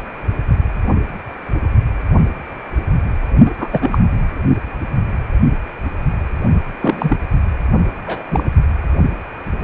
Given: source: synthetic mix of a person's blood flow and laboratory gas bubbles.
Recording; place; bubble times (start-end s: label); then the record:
Doppler ultrasound of blood flow; precordium
3.45-3.51 s: bubbles
3.58-3.69 s: bubbles
3.71-3.98 s: bubbles
6.82-7.17 s: bubbles
8.06-8.22 s: bubbles
8.30-8.43 s: bubbles
From the record:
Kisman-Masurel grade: 223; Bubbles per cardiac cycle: several, 3 to 8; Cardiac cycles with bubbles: 10 to 50%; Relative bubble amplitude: loud (0.450 to 0.775); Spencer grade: 2 (many but less than half of the cardiac periods contain bubble signals, singularly or in groups); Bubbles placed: anywhere in the cardiac cycle